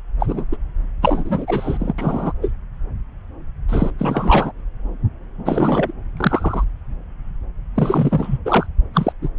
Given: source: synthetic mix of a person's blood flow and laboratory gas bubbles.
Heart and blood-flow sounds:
Doppler ultrasound of blood flow; subclavian vein
0.19-0.45 s: bubbles
0.52-0.57 s: bubbles
1.02-1.93 s: bubbles
1.98-2.32 s: bubbles
2.42-2.52 s: bubbles
3.69-3.91 s: bubbles
3.98-4.52 s: bubbles
5.45-5.93 s: bubbles
6.17-6.64 s: bubbles
7.75-8.38 s: bubbles
8.45-8.67 s: bubbles
8.94-9.12 s: bubbles
9.21-9.29 s: bubbles
From the record:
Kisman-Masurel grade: 233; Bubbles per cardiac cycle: several, 3 to 8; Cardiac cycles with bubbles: 50 to 99%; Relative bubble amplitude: loud (0.450 to 0.775); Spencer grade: 3 (all of the cardiac periods contain showers or single bubble signals, but not dominating or overriding the cardiac motion signals); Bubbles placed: anywhere in the cardiac cycle

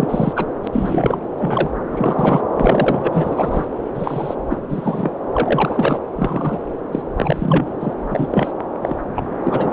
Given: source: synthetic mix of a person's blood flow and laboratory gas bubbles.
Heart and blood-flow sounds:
Doppler ultrasound of blood flow; subclavian vein
0.00-0.46 s: bubbles
0.63-0.68 s: bubbles
0.72-1.19 s: bubbles
1.36-1.71 s: bubbles
1.91-2.41 s: bubbles
2.51-3.68 s: bubbles
3.95-4.34 s: bubbles
4.50-4.57 s: bubbles
4.69-5.13 s: bubbles
5.32-5.99 s: bubbles
6.16-6.60 s: bubbles
6.92-7.03 s: bubbles
7.16-7.71 s: bubbles
7.79-7.95 s: bubbles
8.08-8.28 s: bubbles
8.30-8.53 s: bubbles
8.80-8.99 s: bubbles
9.15-9.28 s: bubbles
9.43-9.73 s: bubbles
From the record:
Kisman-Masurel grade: 243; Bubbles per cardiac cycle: several, 3 to 8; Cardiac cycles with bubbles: 100%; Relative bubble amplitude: loud (0.450 to 0.775); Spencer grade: 3 (all of the cardiac periods contain showers or single bubble signals, but not dominating or overriding the cardiac motion signals); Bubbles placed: anywhere in the cardiac cycle

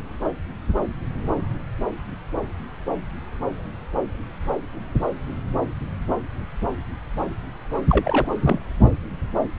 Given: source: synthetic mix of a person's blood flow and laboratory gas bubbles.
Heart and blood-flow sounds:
Doppler ultrasound of blood flow; subclavian vein
7.89-8.26 s: bubbles
8.45-8.59 s: bubbles
From the record:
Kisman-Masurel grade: 122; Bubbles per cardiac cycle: 1 to 2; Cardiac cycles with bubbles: 10 to 50%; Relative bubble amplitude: moderate (0.250 to 0.450); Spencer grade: 2 (many but less than half of the cardiac periods contain bubble signals, singularly or in groups); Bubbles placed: anywhere in the cardiac cycle

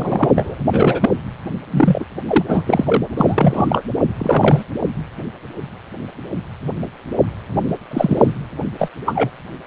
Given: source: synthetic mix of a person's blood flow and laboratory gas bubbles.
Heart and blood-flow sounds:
Doppler ultrasound of blood flow; precordium
0.00-0.31 s: bubbles
0.34-0.56 s: bubbles
0.72-1.10 s: bubbles
1.71-2.05 s: bubbles
2.28-2.43 s: bubbles
2.48-3.06 s: bubbles
3.17-3.83 s: bubbles
4.17-4.63 s: bubbles
7.63-7.72 s: bubbles
7.91-8.33 s: bubbles
8.78-8.88 s: bubbles
9.05-9.30 s: bubbles
From the record:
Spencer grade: 3 (all of the cardiac periods contain showers or single bubble signals, but not dominating or overriding the cardiac motion signals); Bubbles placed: anywhere in the cardiac cycle

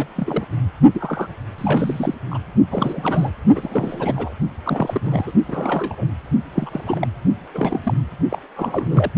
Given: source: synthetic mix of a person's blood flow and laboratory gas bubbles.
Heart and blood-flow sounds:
Doppler ultrasound of blood flow; precordium
0.00-0.07 s: bubbles
0.15-0.47 s: bubbles
0.93-1.27 s: bubbles
1.58-2.15 s: bubbles
2.30-2.39 s: bubbles
2.69-3.31 s: bubbles
3.55-4.33 s: bubbles
4.64-5.01 s: bubbles
5.04-5.31 s: bubbles
5.47-6.08 s: bubbles
6.55-7.08 s: bubbles
7.54-7.80 s: bubbles
7.83-7.94 s: bubbles
8.29-8.39 s: bubbles
8.56-9.12 s: bubbles
From the record:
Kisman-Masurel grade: 342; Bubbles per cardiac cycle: rolling drumbeat, 9 or more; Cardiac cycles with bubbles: 100%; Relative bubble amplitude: moderate (0.250 to 0.450); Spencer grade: 3 (all of the cardiac periods contain showers or single bubble signals, but not dominating or overriding the cardiac motion signals); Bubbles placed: only in the low amplitude regions of the cardiac cycle

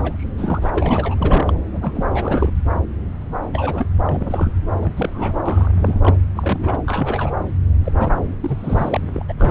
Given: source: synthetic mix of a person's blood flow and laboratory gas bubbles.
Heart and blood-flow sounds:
Doppler ultrasound of blood flow; subclavian vein
0.03-1.15 s: bubbles
1.18-1.65 s: bubbles
1.73-2.06 s: bubbles
2.12-2.52 s: bubbles
3.52-3.87 s: bubbles
4.04-4.53 s: bubbles
4.79-5.37 s: bubbles
5.46-5.71 s: bubbles
5.77-6.15 s: bubbles
6.35-6.80 s: bubbles
6.87-7.32 s: bubbles
7.83-7.92 s: bubbles
7.96-8.12 s: bubbles
8.40-9.00 s: bubbles
9.14-9.25 s: bubbles
9.28-9.33 s: bubbles
9.37-9.50 s: bubbles
From the record:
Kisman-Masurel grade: 232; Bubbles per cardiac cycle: several, 3 to 8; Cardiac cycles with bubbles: 50 to 99%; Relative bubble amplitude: moderate (0.250 to 0.450); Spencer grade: 3 (all of the cardiac periods contain showers or single bubble signals, but not dominating or overriding the cardiac motion signals); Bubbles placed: anywhere in the cardiac cycle

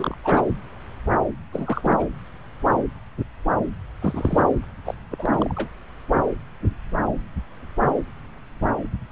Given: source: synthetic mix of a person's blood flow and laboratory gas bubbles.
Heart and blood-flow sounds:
Doppler ultrasound of blood flow; subclavian vein
0.00-0.16 s: bubbles
0.24-0.41 s: bubbles
1.53-2.06 s: bubbles
4.02-4.46 s: bubbles
4.84-4.95 s: bubbles
5.11-5.70 s: bubbles
From the record:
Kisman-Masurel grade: 221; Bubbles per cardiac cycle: several, 3 to 8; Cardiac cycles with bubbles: 10 to 50%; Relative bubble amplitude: barely perceptible (0.100 to 0.250); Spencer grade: 2 (many but less than half of the cardiac periods contain bubble signals, singularly or in groups); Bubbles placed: anywhere in the cardiac cycle

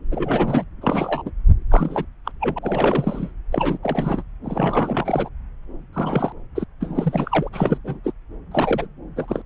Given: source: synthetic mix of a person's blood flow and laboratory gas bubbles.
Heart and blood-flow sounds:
Doppler ultrasound of blood flow; subclavian vein
0.11-0.64 s: bubbles
0.81-1.30 s: bubbles
1.71-2.06 s: bubbles
2.25-2.31 s: bubbles
2.40-2.58 s: bubbles
2.62-3.31 s: bubbles
3.52-3.78 s: bubbles
3.83-4.23 s: bubbles
4.44-5.29 s: bubbles
5.93-6.33 s: bubbles
6.55-6.64 s: bubbles
6.80-7.49 s: bubbles
7.53-7.78 s: bubbles
7.84-8.00 s: bubbles
8.04-8.12 s: bubbles
8.51-8.88 s: bubbles
9.16-9.42 s: bubbles
From the record:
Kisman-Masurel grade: 342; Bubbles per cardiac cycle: rolling drumbeat, 9 or more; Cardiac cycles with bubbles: 100%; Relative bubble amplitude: moderate (0.250 to 0.450); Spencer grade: 3 (all of the cardiac periods contain showers or single bubble signals, but not dominating or overriding the cardiac motion signals); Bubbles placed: anywhere in the cardiac cycle

